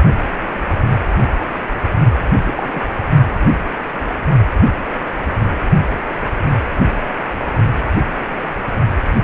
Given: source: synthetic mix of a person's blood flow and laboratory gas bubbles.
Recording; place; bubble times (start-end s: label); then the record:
Doppler ultrasound of blood flow; precordium
2.25-2.28 s: bubbles
2.42-2.82 s: bubbles
From the record:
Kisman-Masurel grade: 221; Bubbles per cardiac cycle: several, 3 to 8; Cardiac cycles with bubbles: 10 to 50%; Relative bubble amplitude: barely perceptible (0.100 to 0.250); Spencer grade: 2 (many but less than half of the cardiac periods contain bubble signals, singularly or in groups); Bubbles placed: only in the low amplitude regions of the cardiac cycle